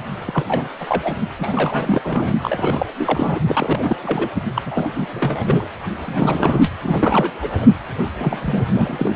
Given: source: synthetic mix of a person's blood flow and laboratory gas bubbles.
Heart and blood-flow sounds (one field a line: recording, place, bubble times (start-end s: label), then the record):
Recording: Doppler ultrasound of blood flow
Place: precordium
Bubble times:
0.27-0.44 s: bubbles
0.47-0.68 s: bubbles
0.80-1.15 s: bubbles
1.39-2.35 s: bubbles
2.42-2.86 s: bubbles
2.98-3.40 s: bubbles
3.45-3.96 s: bubbles
4.02-4.29 s: bubbles
4.55-4.62 s: bubbles
4.66-4.88 s: bubbles
4.91-5.67 s: bubbles
6.04-6.71 s: bubbles
6.81-7.30 s: bubbles
7.41-7.68 s: bubbles
8.18-8.38 s: bubbles
8.42-8.65 s: bubbles
8.72-9.16 s: bubbles
From the record:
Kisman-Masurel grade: 342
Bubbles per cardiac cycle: rolling drumbeat, 9 or more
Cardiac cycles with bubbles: 100%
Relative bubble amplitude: moderate (0.250 to 0.450)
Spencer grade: 3 (all of the cardiac periods contain showers or single bubble signals, but not dominating or overriding the cardiac motion signals)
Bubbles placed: anywhere in the cardiac cycle